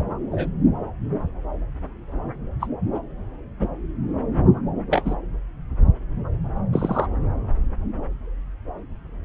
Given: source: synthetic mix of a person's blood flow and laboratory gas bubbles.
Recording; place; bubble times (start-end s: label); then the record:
Doppler ultrasound of blood flow; subclavian vein
0.32-0.50 s: bubbles
2.60-2.68 s: bubbles
2.94-2.99 s: bubbles
3.60-3.69 s: bubbles
4.89-5.15 s: bubbles
6.72-7.07 s: bubbles
From the record:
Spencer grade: 2 (many but less than half of the cardiac periods contain bubble signals, singularly or in groups); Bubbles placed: anywhere in the cardiac cycle